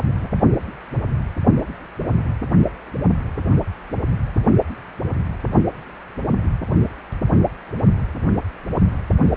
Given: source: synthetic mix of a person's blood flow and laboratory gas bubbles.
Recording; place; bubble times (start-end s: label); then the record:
Doppler ultrasound of blood flow; precordium
0.20-0.28 s: bubbles
From the record:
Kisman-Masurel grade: 112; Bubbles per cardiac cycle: 1 to 2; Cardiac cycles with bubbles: 1 to 10%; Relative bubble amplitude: moderate (0.250 to 0.450); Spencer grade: 1 (occasional bubble signal discernible with the cardiac motion signal, with majority of cardiac periods free of bubbles); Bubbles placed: only in the low amplitude regions of the cardiac cycle